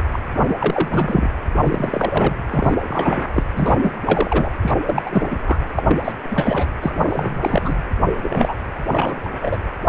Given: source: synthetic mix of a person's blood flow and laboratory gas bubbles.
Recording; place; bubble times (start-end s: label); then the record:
Doppler ultrasound of blood flow; precordium
0.13-0.19 s: bubbles
0.36-0.55 s: bubbles
0.58-1.28 s: bubbles
1.64-2.35 s: bubbles
2.51-2.78 s: bubbles
2.83-3.44 s: bubbles
3.56-3.95 s: bubbles
4.05-4.50 s: bubbles
4.62-4.74 s: bubbles
4.87-5.03 s: bubbles
5.06-5.40 s: bubbles
5.46-5.57 s: bubbles
5.76-5.83 s: bubbles
5.88-6.00 s: bubbles
6.04-6.12 s: bubbles
6.30-6.73 s: bubbles
6.81-7.75 s: bubbles
8.23-8.54 s: bubbles
8.91-9.15 s: bubbles
9.18-9.58 s: bubbles
From the record:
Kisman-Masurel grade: 343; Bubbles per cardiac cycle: rolling drumbeat, 9 or more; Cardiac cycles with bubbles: 100%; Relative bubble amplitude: loud (0.450 to 0.775); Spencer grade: 3 (all of the cardiac periods contain showers or single bubble signals, but not dominating or overriding the cardiac motion signals); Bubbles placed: anywhere in the cardiac cycle